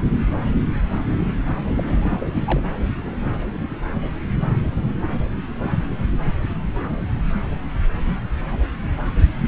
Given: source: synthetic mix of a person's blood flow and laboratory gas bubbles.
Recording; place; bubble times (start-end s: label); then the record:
Doppler ultrasound of blood flow; subclavian vein
1.76-2.43 s: bubbles
2.46-2.62 s: bubbles
From the record:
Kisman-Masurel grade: 211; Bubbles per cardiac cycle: several, 3 to 8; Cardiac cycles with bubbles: 1 to 10%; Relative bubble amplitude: barely perceptible (0.100 to 0.250); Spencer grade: 1 (occasional bubble signal discernible with the cardiac motion signal, with majority of cardiac periods free of bubbles); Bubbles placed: anywhere in the cardiac cycle